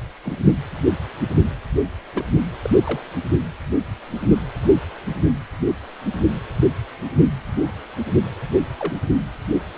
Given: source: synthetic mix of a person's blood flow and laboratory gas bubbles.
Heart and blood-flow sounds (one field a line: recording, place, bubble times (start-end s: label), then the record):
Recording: Doppler ultrasound of blood flow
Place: precordium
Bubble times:
0.22-0.33 s: bubbles
2.15-2.25 s: bubbles
2.65-2.70 s: bubbles
2.83-3.01 s: bubbles
8.79-8.96 s: bubbles
From the record:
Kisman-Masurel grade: 121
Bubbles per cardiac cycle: 1 to 2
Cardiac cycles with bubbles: 10 to 50%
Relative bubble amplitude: barely perceptible (0.100 to 0.250)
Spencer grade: 2 (many but less than half of the cardiac periods contain bubble signals, singularly or in groups)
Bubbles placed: anywhere in the cardiac cycle